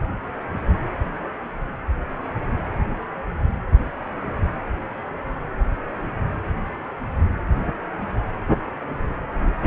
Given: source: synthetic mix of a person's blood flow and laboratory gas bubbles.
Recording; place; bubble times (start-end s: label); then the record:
Doppler ultrasound of blood flow; precordium
no bubbles
From the record:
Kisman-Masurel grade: 000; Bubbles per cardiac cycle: 0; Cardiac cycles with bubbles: 0%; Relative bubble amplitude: no bubbles discernible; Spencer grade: 0 (complete lack of bubble signals)